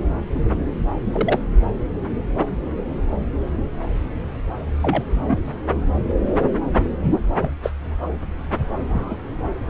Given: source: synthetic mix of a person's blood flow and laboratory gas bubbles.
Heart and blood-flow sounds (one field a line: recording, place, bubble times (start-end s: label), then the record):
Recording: Doppler ultrasound of blood flow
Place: subclavian vein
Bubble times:
1.13-1.39 s: bubbles
4.81-5.38 s: bubbles
7.37-7.50 s: bubbles
7.63-7.71 s: bubbles
8.89-9.16 s: bubbles
From the record:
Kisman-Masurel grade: 122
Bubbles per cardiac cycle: 1 to 2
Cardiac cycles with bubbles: 10 to 50%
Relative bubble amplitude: moderate (0.250 to 0.450)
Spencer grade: 2 (many but less than half of the cardiac periods contain bubble signals, singularly or in groups)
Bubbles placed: anywhere in the cardiac cycle